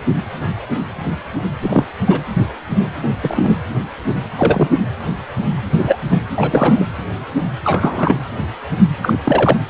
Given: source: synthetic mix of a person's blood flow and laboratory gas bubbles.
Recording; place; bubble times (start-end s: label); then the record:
Doppler ultrasound of blood flow; precordium
1.62-1.85 s: bubbles
2.06-2.19 s: bubbles
3.02-3.10 s: bubbles
3.21-3.57 s: bubbles
4.35-4.69 s: bubbles
5.71-5.97 s: bubbles
6.07-6.19 s: bubbles
6.34-6.85 s: bubbles
7.63-8.20 s: bubbles
9.02-9.18 s: bubbles
9.24-9.58 s: bubbles
From the record:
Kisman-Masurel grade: 223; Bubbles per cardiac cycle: several, 3 to 8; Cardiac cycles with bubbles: 10 to 50%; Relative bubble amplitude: loud (0.450 to 0.775); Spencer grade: 2 (many but less than half of the cardiac periods contain bubble signals, singularly or in groups); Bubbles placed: anywhere in the cardiac cycle